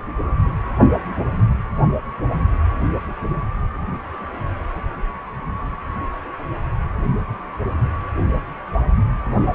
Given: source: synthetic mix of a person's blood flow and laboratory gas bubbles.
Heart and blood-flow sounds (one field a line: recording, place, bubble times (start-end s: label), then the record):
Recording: Doppler ultrasound of blood flow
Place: precordium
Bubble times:
9.53-9.55 s: bubbles
From the record:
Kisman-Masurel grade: 112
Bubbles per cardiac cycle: 1 to 2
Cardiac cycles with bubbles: 1 to 10%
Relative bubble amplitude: moderate (0.250 to 0.450)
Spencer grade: 1 (occasional bubble signal discernible with the cardiac motion signal, with majority of cardiac periods free of bubbles)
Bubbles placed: anywhere in the cardiac cycle